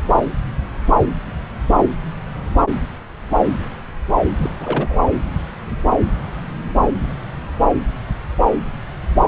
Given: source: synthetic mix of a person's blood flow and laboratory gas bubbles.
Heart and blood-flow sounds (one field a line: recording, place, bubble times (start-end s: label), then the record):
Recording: Doppler ultrasound of blood flow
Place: subclavian vein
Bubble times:
4.27-4.33 s: bubbles
4.37-4.51 s: bubbles
4.58-4.98 s: bubbles
From the record:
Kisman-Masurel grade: 212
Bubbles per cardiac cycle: several, 3 to 8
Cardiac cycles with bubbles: 1 to 10%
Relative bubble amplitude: moderate (0.250 to 0.450)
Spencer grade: 1 (occasional bubble signal discernible with the cardiac motion signal, with majority of cardiac periods free of bubbles)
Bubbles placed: anywhere in the cardiac cycle